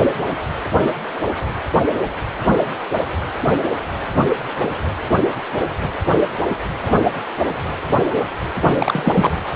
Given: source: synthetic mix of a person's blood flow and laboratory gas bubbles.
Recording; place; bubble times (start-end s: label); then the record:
Doppler ultrasound of blood flow; precordium
8.56-9.31 s: bubbles
From the record:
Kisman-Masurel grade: 222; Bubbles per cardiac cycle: several, 3 to 8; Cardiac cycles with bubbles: 10 to 50%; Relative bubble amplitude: moderate (0.250 to 0.450); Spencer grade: 2 (many but less than half of the cardiac periods contain bubble signals, singularly or in groups); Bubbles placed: anywhere in the cardiac cycle